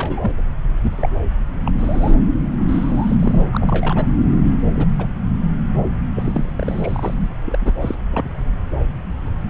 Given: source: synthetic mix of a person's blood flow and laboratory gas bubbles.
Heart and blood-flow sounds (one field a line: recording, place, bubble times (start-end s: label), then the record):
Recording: Doppler ultrasound of blood flow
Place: subclavian vein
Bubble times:
0.00-0.31 s: bubbles
0.82-1.09 s: bubbles
1.66-1.72 s: bubbles
1.78-2.15 s: bubbles
2.67-3.16 s: bubbles
3.19-3.44 s: bubbles
3.52-4.06 s: bubbles
4.72-4.87 s: bubbles
4.98-5.06 s: bubbles
6.15-7.14 s: bubbles
7.45-7.72 s: bubbles
7.80-7.95 s: bubbles
8.11-8.29 s: bubbles
From the record:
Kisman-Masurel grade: 232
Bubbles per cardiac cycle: several, 3 to 8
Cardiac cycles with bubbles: 50 to 99%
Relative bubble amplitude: moderate (0.250 to 0.450)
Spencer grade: 3 (all of the cardiac periods contain showers or single bubble signals, but not dominating or overriding the cardiac motion signals)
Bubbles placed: anywhere in the cardiac cycle